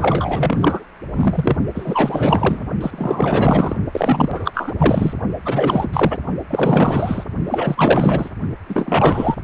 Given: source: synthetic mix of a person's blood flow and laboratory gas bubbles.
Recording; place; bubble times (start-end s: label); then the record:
Doppler ultrasound of blood flow; precordium
0.00-0.84 s: bubbles
1.15-1.56 s: bubbles
1.75-2.63 s: bubbles
2.80-3.76 s: bubbles
3.92-4.51 s: bubbles
4.54-4.73 s: bubbles
4.77-5.13 s: bubbles
5.45-6.18 s: bubbles
6.50-7.24 s: bubbles
7.46-8.29 s: bubbles
8.68-9.36 s: bubbles
From the record:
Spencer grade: 4 (maximum detectable bubble signal sounding continuously throughout systole and diastole of every cardiac period, and overriding the amplitude of the normal cardiac signals); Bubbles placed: only in the low amplitude regions of the cardiac cycle